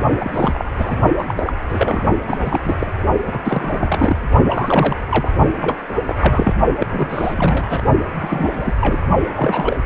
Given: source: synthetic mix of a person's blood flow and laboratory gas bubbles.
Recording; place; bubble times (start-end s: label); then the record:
Doppler ultrasound of blood flow; precordium
0.21-0.64 s: bubbles
0.77-0.96 s: bubbles
1.18-1.43 s: bubbles
1.45-1.53 s: bubbles
1.70-2.06 s: bubbles
2.27-2.60 s: bubbles
2.63-2.78 s: bubbles
2.81-2.95 s: bubbles
3.26-3.38 s: bubbles
3.45-4.17 s: bubbles
4.49-5.00 s: bubbles
5.09-5.32 s: bubbles
5.61-5.81 s: bubbles
5.88-5.93 s: bubbles
6.06-6.15 s: bubbles
6.19-6.53 s: bubbles
6.79-6.86 s: bubbles
6.91-7.82 s: bubbles
8.19-8.73 s: bubbles
8.80-9.00 s: bubbles
9.35-9.76 s: bubbles
From the record:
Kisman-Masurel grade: 342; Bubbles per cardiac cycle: rolling drumbeat, 9 or more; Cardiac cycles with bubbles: 100%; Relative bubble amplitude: moderate (0.250 to 0.450); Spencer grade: 3 (all of the cardiac periods contain showers or single bubble signals, but not dominating or overriding the cardiac motion signals); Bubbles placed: only in the low amplitude regions of the cardiac cycle